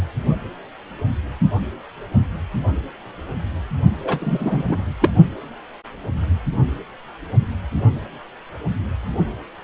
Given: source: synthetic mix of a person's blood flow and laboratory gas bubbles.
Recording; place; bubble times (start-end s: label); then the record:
Doppler ultrasound of blood flow; precordium
4.04-4.63 s: bubbles
4.68-4.82 s: bubbles
5.01-5.11 s: bubbles
From the record:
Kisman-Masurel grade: 223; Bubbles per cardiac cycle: several, 3 to 8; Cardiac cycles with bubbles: 10 to 50%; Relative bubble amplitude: loud (0.450 to 0.775); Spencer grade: 2 (many but less than half of the cardiac periods contain bubble signals, singularly or in groups); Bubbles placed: only in the low amplitude regions of the cardiac cycle